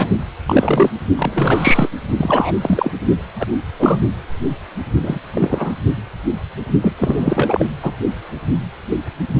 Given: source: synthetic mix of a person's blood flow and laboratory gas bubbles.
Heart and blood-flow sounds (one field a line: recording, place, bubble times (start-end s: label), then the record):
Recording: Doppler ultrasound of blood flow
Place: precordium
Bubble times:
0.00-0.07 s: bubbles
0.46-0.90 s: bubbles
1.16-1.90 s: bubbles
2.17-2.56 s: bubbles
2.61-2.91 s: bubbles
3.39-3.47 s: bubbles
3.79-3.99 s: bubbles
5.02-5.20 s: bubbles
5.33-5.74 s: bubbles
6.82-6.93 s: bubbles
6.98-7.65 s: bubbles
7.82-7.93 s: bubbles
From the record:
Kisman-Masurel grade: 233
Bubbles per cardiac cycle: several, 3 to 8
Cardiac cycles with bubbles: 50 to 99%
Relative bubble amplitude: loud (0.450 to 0.775)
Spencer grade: 3 (all of the cardiac periods contain showers or single bubble signals, but not dominating or overriding the cardiac motion signals)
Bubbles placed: only in the low amplitude regions of the cardiac cycle